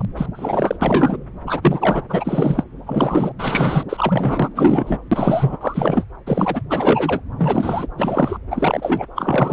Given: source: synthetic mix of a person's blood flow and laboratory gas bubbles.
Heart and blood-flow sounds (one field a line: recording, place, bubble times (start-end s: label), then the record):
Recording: Doppler ultrasound of blood flow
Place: subclavian vein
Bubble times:
0.00-0.05 s: bubbles
0.17-0.26 s: bubbles
0.34-0.77 s: bubbles
0.81-1.18 s: bubbles
1.46-2.02 s: bubbles
2.09-2.63 s: bubbles
2.86-3.32 s: bubbles
3.38-3.84 s: bubbles
3.89-4.48 s: bubbles
4.55-4.98 s: bubbles
5.11-5.57 s: bubbles
5.60-6.04 s: bubbles
6.26-6.62 s: bubbles
6.70-7.22 s: bubbles
7.38-7.87 s: bubbles
7.97-8.38 s: bubbles
8.50-9.04 s: bubbles
9.15-9.53 s: bubbles
From the record:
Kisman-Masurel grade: 343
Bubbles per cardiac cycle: rolling drumbeat, 9 or more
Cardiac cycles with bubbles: 100%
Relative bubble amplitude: loud (0.450 to 0.775)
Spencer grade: 3 (all of the cardiac periods contain showers or single bubble signals, but not dominating or overriding the cardiac motion signals)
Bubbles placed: anywhere in the cardiac cycle